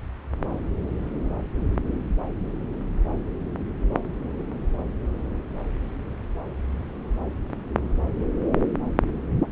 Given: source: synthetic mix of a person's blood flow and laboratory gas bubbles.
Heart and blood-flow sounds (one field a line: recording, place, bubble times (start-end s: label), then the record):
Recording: Doppler ultrasound of blood flow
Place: subclavian vein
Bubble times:
9.40-9.52 s: bubbles
From the record:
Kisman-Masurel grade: 111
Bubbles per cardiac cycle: 1 to 2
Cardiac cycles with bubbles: 1 to 10%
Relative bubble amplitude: barely perceptible (0.100 to 0.250)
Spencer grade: 1 (occasional bubble signal discernible with the cardiac motion signal, with majority of cardiac periods free of bubbles)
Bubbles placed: anywhere in the cardiac cycle